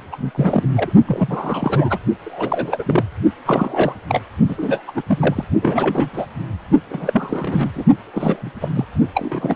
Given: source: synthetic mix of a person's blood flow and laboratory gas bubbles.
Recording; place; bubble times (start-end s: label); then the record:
Doppler ultrasound of blood flow; precordium
0.12-0.31 s: bubbles
0.35-0.64 s: bubbles
0.76-0.93 s: bubbles
1.07-1.99 s: bubbles
2.24-3.04 s: bubbles
3.45-3.94 s: bubbles
4.08-4.23 s: bubbles
4.49-4.83 s: bubbles
4.88-4.92 s: bubbles
4.95-5.02 s: bubbles
5.07-5.45 s: bubbles
5.62-6.10 s: bubbles
6.12-6.26 s: bubbles
6.90-7.69 s: bubbles
7.75-7.84 s: bubbles
8.13-8.52 s: bubbles
8.60-8.70 s: bubbles
8.73-8.85 s: bubbles
9.14-9.55 s: bubbles
From the record:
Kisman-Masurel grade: 342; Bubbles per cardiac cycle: rolling drumbeat, 9 or more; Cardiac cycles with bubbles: 100%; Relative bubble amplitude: moderate (0.250 to 0.450); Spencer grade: 3 (all of the cardiac periods contain showers or single bubble signals, but not dominating or overriding the cardiac motion signals); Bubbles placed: only in the low amplitude regions of the cardiac cycle